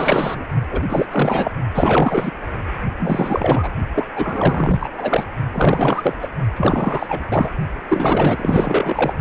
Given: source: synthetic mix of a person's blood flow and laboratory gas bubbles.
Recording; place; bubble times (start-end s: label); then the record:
Doppler ultrasound of blood flow; precordium
0.00-0.45 s: bubbles
0.70-0.82 s: bubbles
0.90-1.06 s: bubbles
1.11-1.51 s: bubbles
1.75-2.31 s: bubbles
3.00-3.71 s: bubbles
3.94-4.09 s: bubbles
4.13-4.89 s: bubbles
4.93-5.24 s: bubbles
5.53-6.14 s: bubbles
6.21-6.29 s: bubbles
6.56-7.25 s: bubbles
7.30-7.49 s: bubbles
7.88-9.13 s: bubbles
From the record:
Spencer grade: 4 (maximum detectable bubble signal sounding continuously throughout systole and diastole of every cardiac period, and overriding the amplitude of the normal cardiac signals); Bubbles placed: only in the low amplitude regions of the cardiac cycle